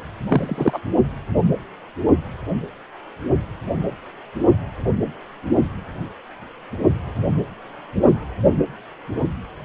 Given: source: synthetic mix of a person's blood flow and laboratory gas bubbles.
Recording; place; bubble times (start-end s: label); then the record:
Doppler ultrasound of blood flow; precordium
0.27-0.79 s: bubbles
From the record:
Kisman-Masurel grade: 223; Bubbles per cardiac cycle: several, 3 to 8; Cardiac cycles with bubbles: 10 to 50%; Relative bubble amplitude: loud (0.450 to 0.775); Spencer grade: 2 (many but less than half of the cardiac periods contain bubble signals, singularly or in groups); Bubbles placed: only in the low amplitude regions of the cardiac cycle